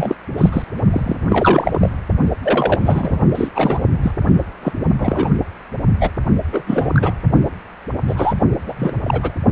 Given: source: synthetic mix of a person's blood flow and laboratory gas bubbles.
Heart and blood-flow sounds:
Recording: Doppler ultrasound of blood flow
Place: precordium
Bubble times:
0.00-0.15 s: bubbles
0.38-0.49 s: bubbles
0.52-0.62 s: bubbles
0.90-1.15 s: bubbles
1.29-1.90 s: bubbles
2.42-3.17 s: bubbles
3.34-3.48 s: bubbles
3.55-3.79 s: bubbles
4.03-4.14 s: bubbles
4.63-4.72 s: bubbles
4.99-5.29 s: bubbles
6.00-6.11 s: bubbles
6.52-6.64 s: bubbles
6.67-7.14 s: bubbles
8.07-8.34 s: bubbles
8.67-8.74 s: bubbles
8.76-8.92 s: bubbles
9.03-9.35 s: bubbles
From the record:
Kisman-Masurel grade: 243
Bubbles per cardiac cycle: several, 3 to 8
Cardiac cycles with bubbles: 100%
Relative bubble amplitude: loud (0.450 to 0.775)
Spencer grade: 3 (all of the cardiac periods contain showers or single bubble signals, but not dominating or overriding the cardiac motion signals)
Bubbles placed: only in the low amplitude regions of the cardiac cycle

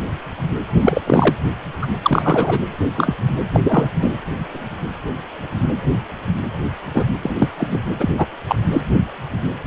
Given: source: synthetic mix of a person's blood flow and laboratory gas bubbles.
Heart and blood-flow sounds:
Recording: Doppler ultrasound of blood flow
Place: precordium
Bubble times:
0.78-1.01 s: bubbles
1.06-1.35 s: bubbles
1.81-1.87 s: bubbles
2.03-2.60 s: bubbles
2.98-3.15 s: bubbles
3.54-3.60 s: bubbles
3.64-4.14 s: bubbles
6.93-7.05 s: bubbles
7.21-7.49 s: bubbles
7.58-7.79 s: bubbles
8.00-8.10 s: bubbles
8.18-8.27 s: bubbles
8.48-8.61 s: bubbles
8.71-8.81 s: bubbles
From the record:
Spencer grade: 3 (all of the cardiac periods contain showers or single bubble signals, but not dominating or overriding the cardiac motion signals)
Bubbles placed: anywhere in the cardiac cycle

